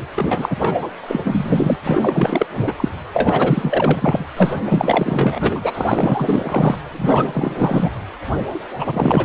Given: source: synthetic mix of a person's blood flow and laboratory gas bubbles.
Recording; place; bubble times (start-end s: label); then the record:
Doppler ultrasound of blood flow; precordium
0.15-0.57 s: bubbles
0.60-0.90 s: bubbles
1.07-1.77 s: bubbles
1.86-2.46 s: bubbles
2.56-2.73 s: bubbles
2.77-2.89 s: bubbles
3.13-4.24 s: bubbles
4.36-4.54 s: bubbles
4.66-6.77 s: bubbles
6.91-7.90 s: bubbles
8.54-8.60 s: bubbles
8.78-9.24 s: bubbles
From the record:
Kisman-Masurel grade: 444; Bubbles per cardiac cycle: continuous sound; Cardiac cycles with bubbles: 100%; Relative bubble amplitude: maximal (0.775 to 0.999); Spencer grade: 4 (maximum detectable bubble signal sounding continuously throughout systole and diastole of every cardiac period, and overriding the amplitude of the normal cardiac signals); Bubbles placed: anywhere in the cardiac cycle